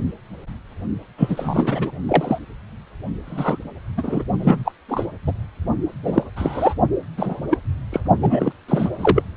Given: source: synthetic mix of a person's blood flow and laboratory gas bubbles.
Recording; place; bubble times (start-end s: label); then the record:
Doppler ultrasound of blood flow; precordium
1.18-1.92 s: bubbles
2.08-2.39 s: bubbles
3.25-3.58 s: bubbles
3.97-4.24 s: bubbles
4.39-4.72 s: bubbles
4.88-5.06 s: bubbles
5.27-5.32 s: bubbles
6.03-6.23 s: bubbles
6.36-6.74 s: bubbles
7.17-7.40 s: bubbles
7.50-7.57 s: bubbles
7.92-8.00 s: bubbles
8.21-8.52 s: bubbles
8.68-9.22 s: bubbles
From the record:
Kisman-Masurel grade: 243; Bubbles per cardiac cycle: several, 3 to 8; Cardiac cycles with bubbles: 100%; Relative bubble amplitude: loud (0.450 to 0.775); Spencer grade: 3 (all of the cardiac periods contain showers or single bubble signals, but not dominating or overriding the cardiac motion signals); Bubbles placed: only in the low amplitude regions of the cardiac cycle